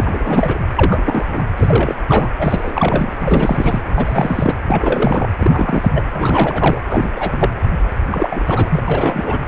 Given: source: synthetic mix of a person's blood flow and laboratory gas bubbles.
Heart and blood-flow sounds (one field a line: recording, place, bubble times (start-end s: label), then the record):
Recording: Doppler ultrasound of blood flow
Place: precordium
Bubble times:
0.00-0.62 s: bubbles
0.75-1.43 s: bubbles
1.56-1.95 s: bubbles
2.08-2.28 s: bubbles
2.38-3.14 s: bubbles
3.19-3.81 s: bubbles
3.96-4.54 s: bubbles
4.67-5.27 s: bubbles
5.39-5.92 s: bubbles
5.95-6.02 s: bubbles
6.12-6.81 s: bubbles
6.89-7.10 s: bubbles
7.16-7.50 s: bubbles
8.11-8.83 s: bubbles
8.88-9.41 s: bubbles
From the record:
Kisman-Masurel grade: 343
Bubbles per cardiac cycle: rolling drumbeat, 9 or more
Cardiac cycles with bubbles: 100%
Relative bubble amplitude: loud (0.450 to 0.775)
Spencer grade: 3 (all of the cardiac periods contain showers or single bubble signals, but not dominating or overriding the cardiac motion signals)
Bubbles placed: anywhere in the cardiac cycle